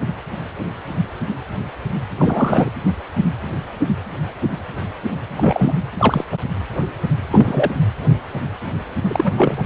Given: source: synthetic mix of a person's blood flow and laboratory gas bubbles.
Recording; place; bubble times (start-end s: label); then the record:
Doppler ultrasound of blood flow; precordium
2.17-2.70 s: bubbles
5.37-5.78 s: bubbles
5.98-6.24 s: bubbles
6.32-6.37 s: bubbles
7.31-7.74 s: bubbles
9.04-9.33 s: bubbles
9.37-9.66 s: bubbles
From the record:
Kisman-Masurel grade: 223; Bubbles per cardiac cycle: several, 3 to 8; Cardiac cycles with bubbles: 10 to 50%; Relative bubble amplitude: loud (0.450 to 0.775); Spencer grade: 2 (many but less than half of the cardiac periods contain bubble signals, singularly or in groups); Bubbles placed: anywhere in the cardiac cycle